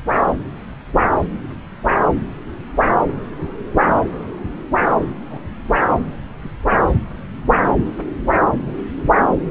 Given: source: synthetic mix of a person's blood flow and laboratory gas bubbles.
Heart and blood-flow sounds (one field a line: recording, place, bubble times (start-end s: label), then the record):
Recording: Doppler ultrasound of blood flow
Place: subclavian vein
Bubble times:
5.30-5.40 s: bubbles
From the record:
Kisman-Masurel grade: 121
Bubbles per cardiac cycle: 1 to 2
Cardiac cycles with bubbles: 10 to 50%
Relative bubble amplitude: barely perceptible (0.100 to 0.250)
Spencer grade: 2 (many but less than half of the cardiac periods contain bubble signals, singularly or in groups)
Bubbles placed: anywhere in the cardiac cycle